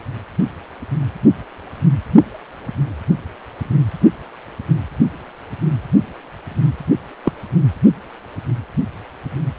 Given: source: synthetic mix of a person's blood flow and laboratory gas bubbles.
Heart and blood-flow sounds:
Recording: Doppler ultrasound of blood flow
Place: precordium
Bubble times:
7.23-7.33 s: bubbles
From the record:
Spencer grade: 1 (occasional bubble signal discernible with the cardiac motion signal, with majority of cardiac periods free of bubbles)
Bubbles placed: only in the low amplitude regions of the cardiac cycle

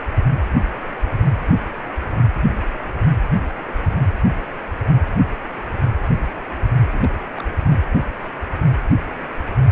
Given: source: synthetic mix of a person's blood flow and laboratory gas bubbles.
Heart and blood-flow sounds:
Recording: Doppler ultrasound of blood flow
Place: precordium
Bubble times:
6.92-7.10 s: bubbles
7.35-7.43 s: bubbles
7.60-7.81 s: bubbles
From the record:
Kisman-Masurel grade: 211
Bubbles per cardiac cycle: several, 3 to 8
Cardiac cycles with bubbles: 1 to 10%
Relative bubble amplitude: barely perceptible (0.100 to 0.250)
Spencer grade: 1 (occasional bubble signal discernible with the cardiac motion signal, with majority of cardiac periods free of bubbles)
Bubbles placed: only in the low amplitude regions of the cardiac cycle

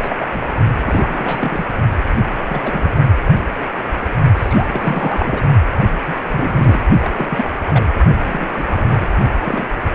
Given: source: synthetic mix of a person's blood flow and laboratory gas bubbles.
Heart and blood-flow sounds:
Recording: Doppler ultrasound of blood flow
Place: precordium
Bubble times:
0.00-0.16 s: bubbles
0.19-0.47 s: bubbles
0.85-1.66 s: bubbles
2.44-2.92 s: bubbles
4.36-5.42 s: bubbles
6.07-6.15 s: bubbles
6.22-6.82 s: bubbles
7.02-7.09 s: bubbles
7.14-7.45 s: bubbles
7.66-7.85 s: bubbles
8.25-8.46 s: bubbles
8.53-9.08 s: bubbles
9.45-9.93 s: bubbles
From the record:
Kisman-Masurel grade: 232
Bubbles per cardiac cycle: several, 3 to 8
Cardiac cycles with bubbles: 50 to 99%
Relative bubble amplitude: moderate (0.250 to 0.450)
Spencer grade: 3 (all of the cardiac periods contain showers or single bubble signals, but not dominating or overriding the cardiac motion signals)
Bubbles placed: only in the low amplitude regions of the cardiac cycle

